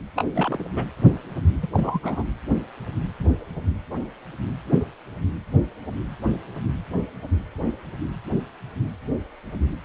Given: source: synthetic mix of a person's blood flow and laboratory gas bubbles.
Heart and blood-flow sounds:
Doppler ultrasound of blood flow; precordium
0.15-0.26 s: bubbles
0.34-0.65 s: bubbles
0.76-0.86 s: bubbles
1.62-1.67 s: bubbles
1.73-2.23 s: bubbles
From the record:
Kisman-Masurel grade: 221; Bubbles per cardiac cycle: several, 3 to 8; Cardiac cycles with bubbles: 10 to 50%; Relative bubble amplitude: barely perceptible (0.100 to 0.250); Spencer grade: 2 (many but less than half of the cardiac periods contain bubble signals, singularly or in groups); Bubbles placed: anywhere in the cardiac cycle

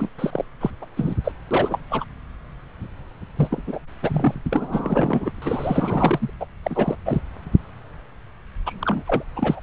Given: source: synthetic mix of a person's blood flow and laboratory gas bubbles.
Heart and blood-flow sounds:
Doppler ultrasound of blood flow; subclavian vein
0.00-0.09 s: bubbles
0.18-0.45 s: bubbles
0.60-0.70 s: bubbles
0.81-0.85 s: bubbles
0.96-1.15 s: bubbles
1.23-1.32 s: bubbles
1.50-1.78 s: bubbles
1.89-2.05 s: bubbles
3.37-3.62 s: bubbles
3.67-3.81 s: bubbles
4.02-4.35 s: bubbles
4.44-5.30 s: bubbles
5.42-6.30 s: bubbles
6.40-6.46 s: bubbles
6.63-6.96 s: bubbles
7.05-7.21 s: bubbles
8.66-9.04 s: bubbles
9.07-9.23 s: bubbles
9.36-9.60 s: bubbles
From the record:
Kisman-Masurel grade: 332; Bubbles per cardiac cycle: rolling drumbeat, 9 or more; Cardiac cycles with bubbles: 50 to 99%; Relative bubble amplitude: moderate (0.250 to 0.450); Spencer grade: 3 (all of the cardiac periods contain showers or single bubble signals, but not dominating or overriding the cardiac motion signals); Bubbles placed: anywhere in the cardiac cycle

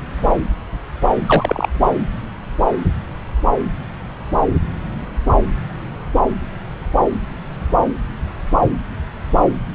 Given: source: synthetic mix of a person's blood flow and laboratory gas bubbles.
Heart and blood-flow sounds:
Doppler ultrasound of blood flow; subclavian vein
1.26-1.67 s: bubbles
1.83-1.89 s: bubbles
From the record:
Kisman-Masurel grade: 213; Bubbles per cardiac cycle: several, 3 to 8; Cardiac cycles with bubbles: 1 to 10%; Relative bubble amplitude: loud (0.450 to 0.775); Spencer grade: 1 (occasional bubble signal discernible with the cardiac motion signal, with majority of cardiac periods free of bubbles); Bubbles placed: anywhere in the cardiac cycle

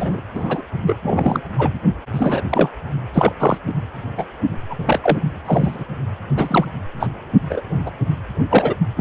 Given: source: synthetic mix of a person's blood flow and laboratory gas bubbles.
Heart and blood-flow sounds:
Doppler ultrasound of blood flow; precordium
0.00-0.21 s: bubbles
0.33-0.63 s: bubbles
0.86-0.96 s: bubbles
1.02-1.41 s: bubbles
1.58-1.74 s: bubbles
2.13-2.42 s: bubbles
2.50-2.69 s: bubbles
3.13-3.33 s: bubbles
3.39-3.58 s: bubbles
3.67-3.74 s: bubbles
4.17-4.25 s: bubbles
4.70-4.75 s: bubbles
4.79-5.00 s: bubbles
5.03-5.17 s: bubbles
5.46-5.84 s: bubbles
6.36-6.66 s: bubbles
7.00-7.07 s: bubbles
7.49-7.62 s: bubbles
7.86-7.91 s: bubbles
8.50-8.74 s: bubbles
8.96-9.01 s: bubbles
From the record:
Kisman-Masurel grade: 243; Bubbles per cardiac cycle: several, 3 to 8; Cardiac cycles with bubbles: 100%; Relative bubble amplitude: loud (0.450 to 0.775); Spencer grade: 3 (all of the cardiac periods contain showers or single bubble signals, but not dominating or overriding the cardiac motion signals); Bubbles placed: only in the low amplitude regions of the cardiac cycle

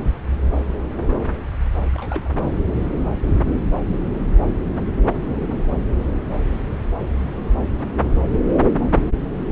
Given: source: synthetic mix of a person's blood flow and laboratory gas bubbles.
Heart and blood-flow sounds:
Doppler ultrasound of blood flow; subclavian vein
1.94-2.30 s: bubbles
From the record:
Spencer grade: 1 (occasional bubble signal discernible with the cardiac motion signal, with majority of cardiac periods free of bubbles); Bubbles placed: anywhere in the cardiac cycle

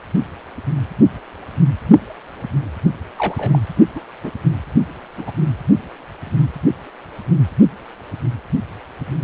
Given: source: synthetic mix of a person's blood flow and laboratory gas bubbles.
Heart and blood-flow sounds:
Doppler ultrasound of blood flow; precordium
3.18-3.60 s: bubbles
3.96-4.00 s: bubbles
4.23-4.31 s: bubbles
5.17-5.24 s: bubbles
5.27-5.32 s: bubbles
From the record:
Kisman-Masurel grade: 122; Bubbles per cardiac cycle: 1 to 2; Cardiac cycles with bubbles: 10 to 50%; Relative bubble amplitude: moderate (0.250 to 0.450); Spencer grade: 2 (many but less than half of the cardiac periods contain bubble signals, singularly or in groups); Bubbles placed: only in the low amplitude regions of the cardiac cycle

